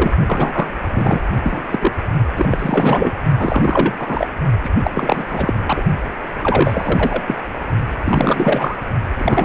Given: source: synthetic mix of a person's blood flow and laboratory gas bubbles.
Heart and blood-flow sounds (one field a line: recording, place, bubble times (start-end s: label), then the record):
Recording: Doppler ultrasound of blood flow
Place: precordium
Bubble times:
0.00-0.11 s: bubbles
0.27-0.70 s: bubbles
0.93-1.21 s: bubbles
1.43-1.65 s: bubbles
1.71-1.92 s: bubbles
2.36-3.13 s: bubbles
3.38-4.27 s: bubbles
4.64-4.70 s: bubbles
4.83-4.92 s: bubbles
4.94-5.54 s: bubbles
5.66-5.83 s: bubbles
6.39-7.23 s: bubbles
7.27-7.42 s: bubbles
8.02-8.78 s: bubbles
9.16-9.45 s: bubbles
From the record:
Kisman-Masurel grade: 343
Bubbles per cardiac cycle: rolling drumbeat, 9 or more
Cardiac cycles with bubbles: 100%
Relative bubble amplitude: loud (0.450 to 0.775)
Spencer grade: 3 (all of the cardiac periods contain showers or single bubble signals, but not dominating or overriding the cardiac motion signals)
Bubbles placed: only in the low amplitude regions of the cardiac cycle